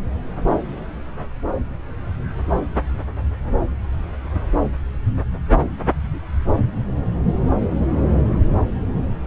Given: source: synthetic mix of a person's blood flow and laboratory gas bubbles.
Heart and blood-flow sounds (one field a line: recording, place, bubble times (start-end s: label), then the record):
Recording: Doppler ultrasound of blood flow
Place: subclavian vein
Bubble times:
no bubbles
From the record:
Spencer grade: 0 (complete lack of bubble signals)